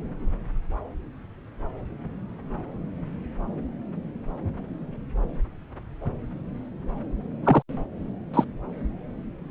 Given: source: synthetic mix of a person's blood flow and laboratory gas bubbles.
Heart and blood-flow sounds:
Doppler ultrasound of blood flow; subclavian vein
7.44-7.62 s: bubbles
8.33-8.44 s: bubbles
From the record:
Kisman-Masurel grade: 123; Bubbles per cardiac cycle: 1 to 2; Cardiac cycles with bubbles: 10 to 50%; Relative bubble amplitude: loud (0.450 to 0.775); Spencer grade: 2 (many but less than half of the cardiac periods contain bubble signals, singularly or in groups); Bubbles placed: anywhere in the cardiac cycle

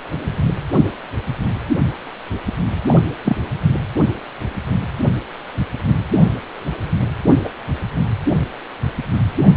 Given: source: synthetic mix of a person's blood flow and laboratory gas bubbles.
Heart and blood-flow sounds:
Doppler ultrasound of blood flow; precordium
2.87-3.02 s: bubbles
3.24-3.37 s: bubbles
7.44-7.49 s: bubbles
From the record:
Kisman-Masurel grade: 122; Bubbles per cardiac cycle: 1 to 2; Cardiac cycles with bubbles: 10 to 50%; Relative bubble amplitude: moderate (0.250 to 0.450); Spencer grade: 2 (many but less than half of the cardiac periods contain bubble signals, singularly or in groups); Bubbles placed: anywhere in the cardiac cycle

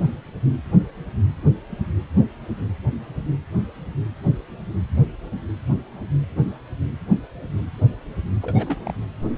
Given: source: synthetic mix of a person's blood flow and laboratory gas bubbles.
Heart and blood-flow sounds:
Doppler ultrasound of blood flow; precordium
8.42-8.92 s: bubbles
From the record:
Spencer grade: 1 (occasional bubble signal discernible with the cardiac motion signal, with majority of cardiac periods free of bubbles); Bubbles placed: anywhere in the cardiac cycle

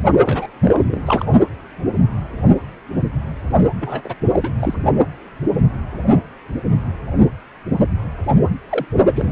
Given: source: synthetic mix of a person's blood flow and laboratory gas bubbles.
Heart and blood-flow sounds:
Doppler ultrasound of blood flow; precordium
0.25-0.47 s: bubbles
0.64-1.01 s: bubbles
1.05-1.25 s: bubbles
3.79-4.14 s: bubbles
4.33-4.52 s: bubbles
4.59-4.74 s: bubbles
8.70-8.85 s: bubbles
9.02-9.32 s: bubbles
From the record:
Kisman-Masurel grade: 232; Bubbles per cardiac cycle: several, 3 to 8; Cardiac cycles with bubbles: 50 to 99%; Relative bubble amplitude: moderate (0.250 to 0.450); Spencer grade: 3 (all of the cardiac periods contain showers or single bubble signals, but not dominating or overriding the cardiac motion signals); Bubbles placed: only in the low amplitude regions of the cardiac cycle

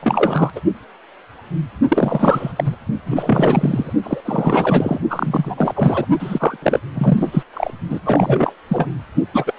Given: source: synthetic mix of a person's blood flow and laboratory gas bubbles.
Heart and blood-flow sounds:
Doppler ultrasound of blood flow; precordium
0.01-0.50 s: bubbles
0.56-0.60 s: bubbles
1.88-2.52 s: bubbles
2.56-2.76 s: bubbles
3.06-3.93 s: bubbles
4.03-4.21 s: bubbles
4.25-5.00 s: bubbles
5.10-5.73 s: bubbles
5.75-6.06 s: bubbles
6.19-6.56 s: bubbles
6.62-6.79 s: bubbles
6.94-7.43 s: bubbles
7.53-7.71 s: bubbles
7.90-8.00 s: bubbles
8.05-8.55 s: bubbles
8.68-8.88 s: bubbles
9.33-9.54 s: bubbles
From the record:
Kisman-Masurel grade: 333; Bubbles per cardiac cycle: rolling drumbeat, 9 or more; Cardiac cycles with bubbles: 50 to 99%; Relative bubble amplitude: loud (0.450 to 0.775); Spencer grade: 3 (all of the cardiac periods contain showers or single bubble signals, but not dominating or overriding the cardiac motion signals); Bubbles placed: only in the low amplitude regions of the cardiac cycle

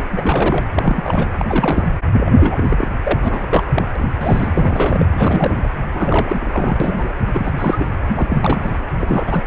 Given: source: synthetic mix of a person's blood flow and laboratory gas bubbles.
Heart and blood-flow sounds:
Doppler ultrasound of blood flow; precordium
0.11-0.64 s: bubbles
0.74-1.28 s: bubbles
1.38-1.86 s: bubbles
2.12-2.86 s: bubbles
3.04-3.86 s: bubbles
3.96-4.10 s: bubbles
4.20-5.05 s: bubbles
5.17-5.67 s: bubbles
5.94-7.13 s: bubbles
7.33-7.52 s: bubbles
7.56-7.87 s: bubbles
8.14-8.85 s: bubbles
8.99-9.45 s: bubbles
From the record:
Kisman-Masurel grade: 342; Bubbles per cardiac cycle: rolling drumbeat, 9 or more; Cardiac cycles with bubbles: 100%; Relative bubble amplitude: moderate (0.250 to 0.450); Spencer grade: 3 (all of the cardiac periods contain showers or single bubble signals, but not dominating or overriding the cardiac motion signals); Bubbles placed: anywhere in the cardiac cycle

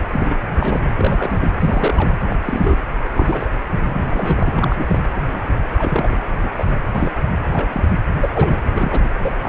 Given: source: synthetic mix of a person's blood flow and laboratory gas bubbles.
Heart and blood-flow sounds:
Doppler ultrasound of blood flow; precordium
0.11-0.36 s: bubbles
0.57-0.89 s: bubbles
0.96-1.48 s: bubbles
1.59-2.14 s: bubbles
2.20-2.36 s: bubbles
2.45-2.78 s: bubbles
3.04-3.08 s: bubbles
3.14-3.49 s: bubbles
3.83-4.99 s: bubbles
5.16-5.21 s: bubbles
5.31-5.41 s: bubbles
5.78-6.17 s: bubbles
6.42-6.49 s: bubbles
6.56-6.65 s: bubbles
6.67-6.75 s: bubbles
6.92-7.11 s: bubbles
7.49-7.88 s: bubbles
8.18-8.29 s: bubbles
8.34-8.57 s: bubbles
8.75-9.09 s: bubbles
9.18-9.32 s: bubbles
9.43-9.49 s: bubbles
From the record:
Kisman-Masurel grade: 242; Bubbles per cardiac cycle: several, 3 to 8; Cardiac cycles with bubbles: 100%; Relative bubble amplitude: moderate (0.250 to 0.450); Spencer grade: 3 (all of the cardiac periods contain showers or single bubble signals, but not dominating or overriding the cardiac motion signals); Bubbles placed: anywhere in the cardiac cycle

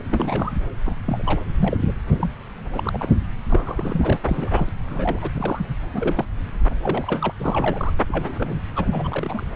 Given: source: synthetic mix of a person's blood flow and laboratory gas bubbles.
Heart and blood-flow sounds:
Doppler ultrasound of blood flow; subclavian vein
0.00-0.02 s: bubbles
0.08-0.52 s: bubbles
0.85-0.97 s: bubbles
1.06-1.40 s: bubbles
1.57-1.77 s: bubbles
1.88-1.94 s: bubbles
2.11-2.33 s: bubbles
2.72-3.15 s: bubbles
3.49-4.20 s: bubbles
4.24-4.69 s: bubbles
4.86-5.19 s: bubbles
5.21-5.30 s: bubbles
5.34-5.66 s: bubbles
5.93-6.25 s: bubbles
6.82-7.32 s: bubbles
7.38-7.93 s: bubbles
8.09-8.56 s: bubbles
8.75-8.86 s: bubbles
8.92-9.47 s: bubbles
From the record:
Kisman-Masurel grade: 242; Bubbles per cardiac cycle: several, 3 to 8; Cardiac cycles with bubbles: 100%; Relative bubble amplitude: moderate (0.250 to 0.450); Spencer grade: 3 (all of the cardiac periods contain showers or single bubble signals, but not dominating or overriding the cardiac motion signals); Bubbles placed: anywhere in the cardiac cycle

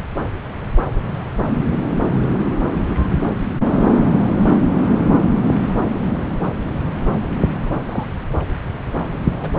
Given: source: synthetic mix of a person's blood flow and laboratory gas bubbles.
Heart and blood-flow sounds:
Doppler ultrasound of blood flow; subclavian vein
7.84-8.08 s: bubbles
9.36-9.51 s: bubbles
From the record:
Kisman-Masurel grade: 121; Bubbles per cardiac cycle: 1 to 2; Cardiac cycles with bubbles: 10 to 50%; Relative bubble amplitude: barely perceptible (0.100 to 0.250); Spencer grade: 2 (many but less than half of the cardiac periods contain bubble signals, singularly or in groups); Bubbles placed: anywhere in the cardiac cycle

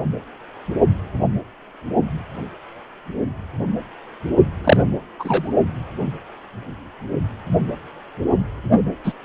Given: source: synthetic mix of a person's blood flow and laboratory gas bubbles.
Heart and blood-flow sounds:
Doppler ultrasound of blood flow; precordium
4.64-4.98 s: bubbles
5.19-5.53 s: bubbles
8.71-8.81 s: bubbles
9.04-9.12 s: bubbles
From the record:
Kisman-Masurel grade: 223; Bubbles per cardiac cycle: several, 3 to 8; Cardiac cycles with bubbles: 10 to 50%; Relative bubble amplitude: loud (0.450 to 0.775); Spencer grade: 2 (many but less than half of the cardiac periods contain bubble signals, singularly or in groups); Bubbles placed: only in the low amplitude regions of the cardiac cycle

